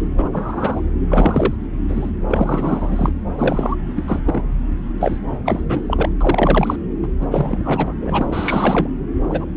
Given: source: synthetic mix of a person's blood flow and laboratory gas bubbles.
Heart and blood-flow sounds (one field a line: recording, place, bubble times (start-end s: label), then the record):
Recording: Doppler ultrasound of blood flow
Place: subclavian vein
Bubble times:
0.00-0.02 s: bubbles
0.18-0.82 s: bubbles
1.09-1.53 s: bubbles
1.88-2.10 s: bubbles
2.27-3.13 s: bubbles
3.38-3.76 s: bubbles
3.96-4.22 s: bubbles
4.26-4.43 s: bubbles
5.00-5.20 s: bubbles
5.45-5.61 s: bubbles
5.68-5.83 s: bubbles
5.88-6.09 s: bubbles
6.21-6.76 s: bubbles
7.03-7.08 s: bubbles
7.21-7.26 s: bubbles
7.31-7.94 s: bubbles
8.01-8.88 s: bubbles
9.30-9.46 s: bubbles
From the record:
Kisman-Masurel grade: 343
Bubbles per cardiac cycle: rolling drumbeat, 9 or more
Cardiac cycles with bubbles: 100%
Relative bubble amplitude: loud (0.450 to 0.775)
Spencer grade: 3 (all of the cardiac periods contain showers or single bubble signals, but not dominating or overriding the cardiac motion signals)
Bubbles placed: anywhere in the cardiac cycle